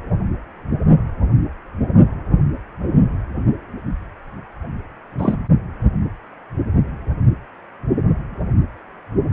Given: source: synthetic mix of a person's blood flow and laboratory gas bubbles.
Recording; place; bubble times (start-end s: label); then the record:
Doppler ultrasound of blood flow; precordium
5.17-5.37 s: bubbles
From the record:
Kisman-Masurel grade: 113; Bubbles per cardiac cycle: 1 to 2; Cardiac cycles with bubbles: 1 to 10%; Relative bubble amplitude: loud (0.450 to 0.775); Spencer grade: 1 (occasional bubble signal discernible with the cardiac motion signal, with majority of cardiac periods free of bubbles); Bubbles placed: only in the low amplitude regions of the cardiac cycle